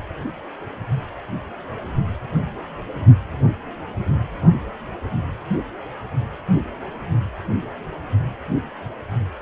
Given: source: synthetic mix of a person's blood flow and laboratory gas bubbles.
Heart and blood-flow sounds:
Doppler ultrasound of blood flow; precordium
no bubbles
From the record:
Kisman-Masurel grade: 000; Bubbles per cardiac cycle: 0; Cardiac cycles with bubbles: 0%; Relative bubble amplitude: no bubbles discernible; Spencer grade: 0 (complete lack of bubble signals)

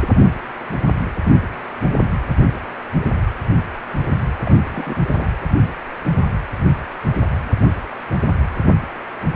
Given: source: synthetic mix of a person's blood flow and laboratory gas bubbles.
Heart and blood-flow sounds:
Doppler ultrasound of blood flow; precordium
4.45-4.59 s: bubbles
4.70-5.30 s: bubbles
From the record:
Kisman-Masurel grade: 211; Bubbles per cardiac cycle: several, 3 to 8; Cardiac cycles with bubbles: 1 to 10%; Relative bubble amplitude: barely perceptible (0.100 to 0.250); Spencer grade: 1 (occasional bubble signal discernible with the cardiac motion signal, with majority of cardiac periods free of bubbles); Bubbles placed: anywhere in the cardiac cycle

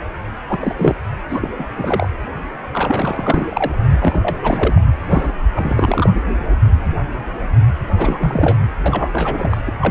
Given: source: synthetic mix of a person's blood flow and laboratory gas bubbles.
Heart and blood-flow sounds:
Doppler ultrasound of blood flow; precordium
0.47-0.74 s: bubbles
0.77-0.95 s: bubbles
1.29-1.49 s: bubbles
1.58-1.65 s: bubbles
1.77-2.08 s: bubbles
2.73-3.78 s: bubbles
4.00-4.38 s: bubbles
4.41-4.82 s: bubbles
5.09-5.32 s: bubbles
5.54-6.09 s: bubbles
7.98-8.56 s: bubbles
8.86-9.61 s: bubbles
9.67-9.71 s: bubbles
9.81-9.91 s: bubbles
From the record:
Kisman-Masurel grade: 332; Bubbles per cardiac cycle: rolling drumbeat, 9 or more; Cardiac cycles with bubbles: 50 to 99%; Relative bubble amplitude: moderate (0.250 to 0.450); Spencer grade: 3 (all of the cardiac periods contain showers or single bubble signals, but not dominating or overriding the cardiac motion signals); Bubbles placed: anywhere in the cardiac cycle

